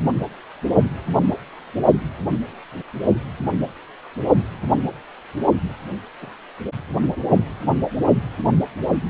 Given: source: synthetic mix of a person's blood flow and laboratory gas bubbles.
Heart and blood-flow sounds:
Doppler ultrasound of blood flow; precordium
6.21-6.29 s: bubbles
From the record:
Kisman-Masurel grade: 111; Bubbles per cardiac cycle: 1 to 2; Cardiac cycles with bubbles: 1 to 10%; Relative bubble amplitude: barely perceptible (0.100 to 0.250); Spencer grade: 1 (occasional bubble signal discernible with the cardiac motion signal, with majority of cardiac periods free of bubbles); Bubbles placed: only in the low amplitude regions of the cardiac cycle

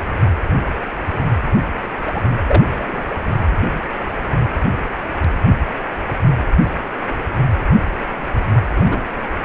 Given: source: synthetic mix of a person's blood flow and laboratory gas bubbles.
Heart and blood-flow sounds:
Doppler ultrasound of blood flow; precordium
2.02-2.21 s: bubbles
2.48-2.63 s: bubbles
2.79-3.02 s: bubbles
8.75-9.05 s: bubbles
From the record:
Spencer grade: 2 (many but less than half of the cardiac periods contain bubble signals, singularly or in groups); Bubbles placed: anywhere in the cardiac cycle

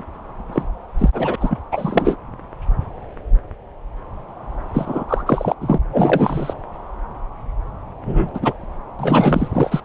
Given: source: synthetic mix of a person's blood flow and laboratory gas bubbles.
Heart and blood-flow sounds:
Doppler ultrasound of blood flow; subclavian vein
0.52-0.63 s: bubbles
0.98-1.09 s: bubbles
1.12-1.35 s: bubbles
1.40-1.57 s: bubbles
1.71-2.16 s: bubbles
4.74-5.06 s: bubbles
5.08-5.24 s: bubbles
5.26-5.55 s: bubbles
5.61-5.80 s: bubbles
5.93-6.54 s: bubbles
8.05-8.29 s: bubbles
8.34-8.54 s: bubbles
8.99-9.82 s: bubbles
From the record:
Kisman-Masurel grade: 233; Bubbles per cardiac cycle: several, 3 to 8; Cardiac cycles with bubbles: 50 to 99%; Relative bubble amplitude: loud (0.450 to 0.775); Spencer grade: 3 (all of the cardiac periods contain showers or single bubble signals, but not dominating or overriding the cardiac motion signals); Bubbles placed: anywhere in the cardiac cycle

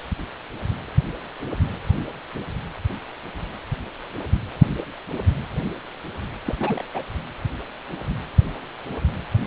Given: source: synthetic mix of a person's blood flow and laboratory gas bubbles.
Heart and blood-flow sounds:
Doppler ultrasound of blood flow; precordium
6.45-6.55 s: bubbles
6.60-6.84 s: bubbles
6.95-7.03 s: bubbles
From the record:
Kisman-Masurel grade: 211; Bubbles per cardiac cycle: several, 3 to 8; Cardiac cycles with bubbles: 1 to 10%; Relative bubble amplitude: barely perceptible (0.100 to 0.250); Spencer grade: 1 (occasional bubble signal discernible with the cardiac motion signal, with majority of cardiac periods free of bubbles); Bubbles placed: anywhere in the cardiac cycle

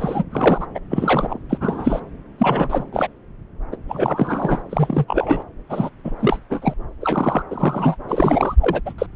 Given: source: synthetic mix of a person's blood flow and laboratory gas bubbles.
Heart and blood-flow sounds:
Doppler ultrasound of blood flow; subclavian vein
0.00-0.25 s: bubbles
0.32-0.66 s: bubbles
0.75-0.80 s: bubbles
0.91-1.38 s: bubbles
1.49-1.58 s: bubbles
1.61-2.00 s: bubbles
2.39-2.84 s: bubbles
2.92-3.07 s: bubbles
3.71-3.76 s: bubbles
3.88-4.62 s: bubbles
4.69-5.05 s: bubbles
5.08-5.42 s: bubbles
5.69-5.89 s: bubbles
6.04-6.12 s: bubbles
6.20-6.39 s: bubbles
6.50-6.74 s: bubbles
7.01-7.42 s: bubbles
7.51-7.96 s: bubbles
8.08-8.55 s: bubbles
8.61-8.81 s: bubbles
8.86-8.93 s: bubbles
8.98-9.06 s: bubbles
From the record:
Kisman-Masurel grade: 233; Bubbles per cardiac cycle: several, 3 to 8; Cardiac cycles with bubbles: 50 to 99%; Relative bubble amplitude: loud (0.450 to 0.775); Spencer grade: 3 (all of the cardiac periods contain showers or single bubble signals, but not dominating or overriding the cardiac motion signals); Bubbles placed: anywhere in the cardiac cycle

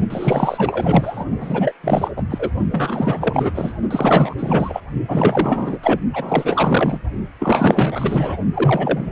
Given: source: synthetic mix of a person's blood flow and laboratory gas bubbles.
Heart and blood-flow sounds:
Doppler ultrasound of blood flow; precordium
0.10-1.24 s: bubbles
1.40-1.73 s: bubbles
1.83-2.11 s: bubbles
2.16-2.22 s: bubbles
2.30-2.50 s: bubbles
2.71-3.51 s: bubbles
3.54-3.74 s: bubbles
3.91-4.35 s: bubbles
4.38-4.80 s: bubbles
5.08-5.79 s: bubbles
5.83-6.00 s: bubbles
6.13-6.99 s: bubbles
7.39-8.37 s: bubbles
8.54-9.12 s: bubbles
From the record:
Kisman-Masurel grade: 444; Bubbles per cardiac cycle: continuous sound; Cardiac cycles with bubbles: 100%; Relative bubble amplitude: maximal (0.775 to 0.999); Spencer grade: 4 (maximum detectable bubble signal sounding continuously throughout systole and diastole of every cardiac period, and overriding the amplitude of the normal cardiac signals); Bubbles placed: only in the low amplitude regions of the cardiac cycle

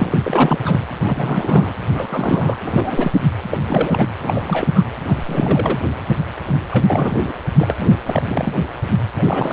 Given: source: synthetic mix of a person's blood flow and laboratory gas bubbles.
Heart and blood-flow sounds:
Doppler ultrasound of blood flow; precordium
0.00-0.83 s: bubbles
1.02-2.57 s: bubbles
2.65-3.12 s: bubbles
3.50-3.58 s: bubbles
3.64-4.08 s: bubbles
4.19-4.70 s: bubbles
4.74-4.83 s: bubbles
5.02-5.23 s: bubbles
5.25-5.78 s: bubbles
6.71-6.84 s: bubbles
6.88-7.33 s: bubbles
7.57-7.98 s: bubbles
8.06-8.54 s: bubbles
9.15-9.53 s: bubbles
From the record:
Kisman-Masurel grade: 332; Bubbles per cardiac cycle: rolling drumbeat, 9 or more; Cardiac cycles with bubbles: 50 to 99%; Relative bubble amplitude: moderate (0.250 to 0.450); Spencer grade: 3 (all of the cardiac periods contain showers or single bubble signals, but not dominating or overriding the cardiac motion signals); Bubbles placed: anywhere in the cardiac cycle

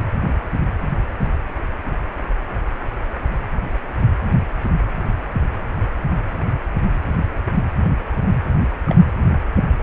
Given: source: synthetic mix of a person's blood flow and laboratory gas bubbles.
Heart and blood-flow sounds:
Doppler ultrasound of blood flow; precordium
8.87-8.95 s: bubbles
From the record:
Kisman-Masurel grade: 112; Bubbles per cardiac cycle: 1 to 2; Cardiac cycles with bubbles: 1 to 10%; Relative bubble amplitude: moderate (0.250 to 0.450); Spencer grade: 1 (occasional bubble signal discernible with the cardiac motion signal, with majority of cardiac periods free of bubbles); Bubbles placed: anywhere in the cardiac cycle

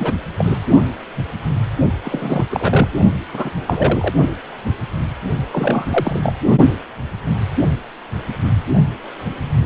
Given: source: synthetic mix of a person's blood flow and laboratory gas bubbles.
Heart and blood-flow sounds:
Doppler ultrasound of blood flow; precordium
0.00-0.13 s: bubbles
0.36-0.58 s: bubbles
2.04-2.46 s: bubbles
2.50-2.91 s: bubbles
3.33-3.50 s: bubbles
3.67-4.14 s: bubbles
5.51-6.20 s: bubbles
6.23-6.35 s: bubbles
From the record:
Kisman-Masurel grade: 232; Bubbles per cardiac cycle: several, 3 to 8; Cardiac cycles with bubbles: 50 to 99%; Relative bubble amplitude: moderate (0.250 to 0.450); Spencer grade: 3 (all of the cardiac periods contain showers or single bubble signals, but not dominating or overriding the cardiac motion signals); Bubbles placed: only in the low amplitude regions of the cardiac cycle

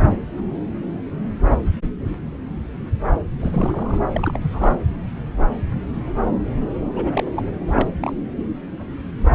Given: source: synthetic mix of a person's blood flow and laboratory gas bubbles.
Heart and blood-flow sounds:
Doppler ultrasound of blood flow; subclavian vein
3.40-3.99 s: bubbles
4.13-4.39 s: bubbles
4.42-4.75 s: bubbles
6.96-7.32 s: bubbles
7.34-7.42 s: bubbles
7.68-7.89 s: bubbles
8.00-8.13 s: bubbles
From the record:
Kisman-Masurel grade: 221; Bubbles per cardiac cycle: several, 3 to 8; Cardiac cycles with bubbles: 10 to 50%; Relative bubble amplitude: barely perceptible (0.100 to 0.250); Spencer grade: 2 (many but less than half of the cardiac periods contain bubble signals, singularly or in groups); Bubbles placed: anywhere in the cardiac cycle

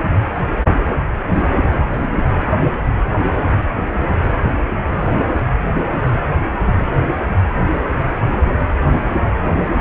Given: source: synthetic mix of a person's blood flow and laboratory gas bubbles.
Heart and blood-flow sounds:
Doppler ultrasound of blood flow; precordium
1.31-1.58 s: bubbles
1.91-2.06 s: bubbles
5.38-5.46 s: bubbles
9.44-9.52 s: bubbles
9.79-9.81 s: bubbles
From the record:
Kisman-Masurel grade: 121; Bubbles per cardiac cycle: 1 to 2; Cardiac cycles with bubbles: 10 to 50%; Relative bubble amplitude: barely perceptible (0.100 to 0.250); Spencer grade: 2 (many but less than half of the cardiac periods contain bubble signals, singularly or in groups); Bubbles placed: anywhere in the cardiac cycle

